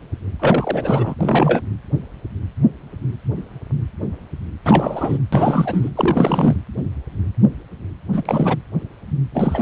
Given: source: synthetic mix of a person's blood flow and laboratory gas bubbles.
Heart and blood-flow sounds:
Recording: Doppler ultrasound of blood flow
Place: precordium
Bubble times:
0.40-1.15 s: bubbles
1.21-1.61 s: bubbles
4.64-5.18 s: bubbles
5.32-5.90 s: bubbles
5.95-6.56 s: bubbles
8.12-8.56 s: bubbles
9.33-9.62 s: bubbles
From the record:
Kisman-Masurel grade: 333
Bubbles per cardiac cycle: rolling drumbeat, 9 or more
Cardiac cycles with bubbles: 50 to 99%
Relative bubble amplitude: loud (0.450 to 0.775)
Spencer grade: 3 (all of the cardiac periods contain showers or single bubble signals, but not dominating or overriding the cardiac motion signals)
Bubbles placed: anywhere in the cardiac cycle

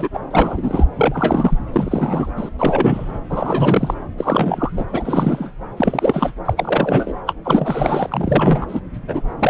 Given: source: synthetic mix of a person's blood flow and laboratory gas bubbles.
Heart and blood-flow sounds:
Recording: Doppler ultrasound of blood flow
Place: subclavian vein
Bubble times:
0.00-0.09 s: bubbles
0.14-0.20 s: bubbles
0.31-0.85 s: bubbles
0.96-1.58 s: bubbles
1.72-2.31 s: bubbles
2.37-2.49 s: bubbles
2.58-3.19 s: bubbles
3.29-3.94 s: bubbles
4.17-4.71 s: bubbles
4.76-4.85 s: bubbles
4.93-5.51 s: bubbles
5.76-6.34 s: bubbles
6.44-6.53 s: bubbles
6.56-7.13 s: bubbles
7.26-7.34 s: bubbles
7.44-8.80 s: bubbles
9.08-9.21 s: bubbles
9.39-9.50 s: bubbles
From the record:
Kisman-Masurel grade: 343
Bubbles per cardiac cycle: rolling drumbeat, 9 or more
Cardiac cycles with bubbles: 100%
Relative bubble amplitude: loud (0.450 to 0.775)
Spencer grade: 3 (all of the cardiac periods contain showers or single bubble signals, but not dominating or overriding the cardiac motion signals)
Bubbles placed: anywhere in the cardiac cycle

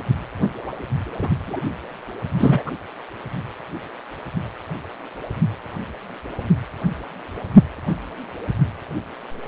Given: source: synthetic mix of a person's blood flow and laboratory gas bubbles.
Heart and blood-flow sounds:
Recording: Doppler ultrasound of blood flow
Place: precordium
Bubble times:
1.21-1.29 s: bubbles
1.47-1.60 s: bubbles
2.38-2.63 s: bubbles
2.66-2.71 s: bubbles
From the record:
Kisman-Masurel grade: 222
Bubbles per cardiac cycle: several, 3 to 8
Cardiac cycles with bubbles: 10 to 50%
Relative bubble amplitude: moderate (0.250 to 0.450)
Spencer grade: 2 (many but less than half of the cardiac periods contain bubble signals, singularly or in groups)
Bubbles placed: anywhere in the cardiac cycle

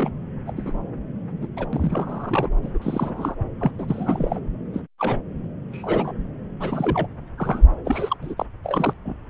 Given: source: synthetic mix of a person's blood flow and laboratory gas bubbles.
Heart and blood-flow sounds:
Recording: Doppler ultrasound of blood flow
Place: subclavian vein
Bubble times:
0.00-0.09 s: bubbles
0.47-0.52 s: bubbles
0.56-0.73 s: bubbles
1.42-1.47 s: bubbles
1.56-1.66 s: bubbles
1.73-2.49 s: bubbles
2.61-2.71 s: bubbles
2.74-2.78 s: bubbles
2.81-3.35 s: bubbles
3.60-3.71 s: bubbles
3.78-4.39 s: bubbles
4.73-4.81 s: bubbles
4.99-5.18 s: bubbles
5.72-6.12 s: bubbles
6.59-7.07 s: bubbles
7.38-7.67 s: bubbles
7.85-8.17 s: bubbles
8.21-8.35 s: bubbles
8.38-8.46 s: bubbles
8.64-8.94 s: bubbles
9.05-9.15 s: bubbles
From the record:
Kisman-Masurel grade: 242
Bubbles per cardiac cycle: several, 3 to 8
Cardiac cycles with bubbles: 100%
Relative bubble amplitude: moderate (0.250 to 0.450)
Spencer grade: 3 (all of the cardiac periods contain showers or single bubble signals, but not dominating or overriding the cardiac motion signals)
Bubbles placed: anywhere in the cardiac cycle

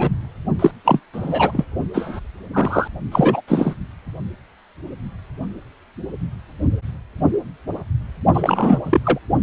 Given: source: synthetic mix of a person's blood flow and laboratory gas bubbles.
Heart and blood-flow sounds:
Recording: Doppler ultrasound of blood flow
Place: precordium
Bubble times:
0.00-0.10 s: bubbles
0.59-0.71 s: bubbles
0.84-1.00 s: bubbles
1.13-1.65 s: bubbles
1.93-2.20 s: bubbles
2.53-2.88 s: bubbles
3.12-3.41 s: bubbles
3.47-3.75 s: bubbles
8.33-8.79 s: bubbles
8.84-9.00 s: bubbles
9.04-9.18 s: bubbles
From the record:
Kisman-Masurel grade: 233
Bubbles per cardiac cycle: several, 3 to 8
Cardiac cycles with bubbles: 50 to 99%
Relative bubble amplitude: loud (0.450 to 0.775)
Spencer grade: 3 (all of the cardiac periods contain showers or single bubble signals, but not dominating or overriding the cardiac motion signals)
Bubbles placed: only in the low amplitude regions of the cardiac cycle

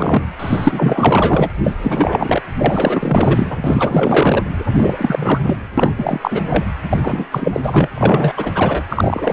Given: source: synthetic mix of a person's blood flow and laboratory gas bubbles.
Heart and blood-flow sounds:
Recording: Doppler ultrasound of blood flow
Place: precordium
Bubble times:
0.00-0.26 s: bubbles
0.39-1.50 s: bubbles
1.64-1.75 s: bubbles
1.81-2.42 s: bubbles
2.58-3.57 s: bubbles
3.64-4.43 s: bubbles
4.78-5.57 s: bubbles
5.78-5.93 s: bubbles
5.98-6.43 s: bubbles
6.50-6.65 s: bubbles
6.89-7.26 s: bubbles
7.32-7.61 s: bubbles
7.64-7.88 s: bubbles
7.94-8.84 s: bubbles
8.89-9.32 s: bubbles
From the record:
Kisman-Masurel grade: 444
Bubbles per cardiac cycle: continuous sound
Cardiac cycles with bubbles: 100%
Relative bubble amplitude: maximal (0.775 to 0.999)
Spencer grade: 4 (maximum detectable bubble signal sounding continuously throughout systole and diastole of every cardiac period, and overriding the amplitude of the normal cardiac signals)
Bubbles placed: anywhere in the cardiac cycle

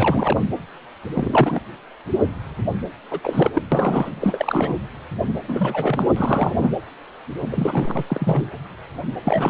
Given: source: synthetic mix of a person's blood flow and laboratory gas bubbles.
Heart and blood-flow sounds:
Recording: Doppler ultrasound of blood flow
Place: precordium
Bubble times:
0.00-0.41 s: bubbles
1.14-1.59 s: bubbles
3.11-3.19 s: bubbles
3.23-3.62 s: bubbles
3.71-4.10 s: bubbles
4.20-4.81 s: bubbles
5.48-6.08 s: bubbles
6.16-6.71 s: bubbles
7.50-8.03 s: bubbles
8.07-8.52 s: bubbles
9.24-9.49 s: bubbles
From the record:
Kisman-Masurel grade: 332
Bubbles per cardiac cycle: rolling drumbeat, 9 or more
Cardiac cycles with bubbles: 50 to 99%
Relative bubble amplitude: moderate (0.250 to 0.450)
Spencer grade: 3 (all of the cardiac periods contain showers or single bubble signals, but not dominating or overriding the cardiac motion signals)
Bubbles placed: anywhere in the cardiac cycle

